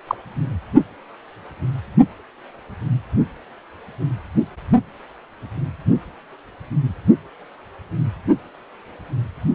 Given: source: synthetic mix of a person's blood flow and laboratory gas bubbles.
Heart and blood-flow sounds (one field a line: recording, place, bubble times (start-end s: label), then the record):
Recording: Doppler ultrasound of blood flow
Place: precordium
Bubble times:
0.07-0.15 s: bubbles
From the record:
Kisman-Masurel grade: 112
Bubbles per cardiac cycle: 1 to 2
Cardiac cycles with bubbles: 1 to 10%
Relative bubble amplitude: moderate (0.250 to 0.450)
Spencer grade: 1 (occasional bubble signal discernible with the cardiac motion signal, with majority of cardiac periods free of bubbles)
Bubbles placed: only in the low amplitude regions of the cardiac cycle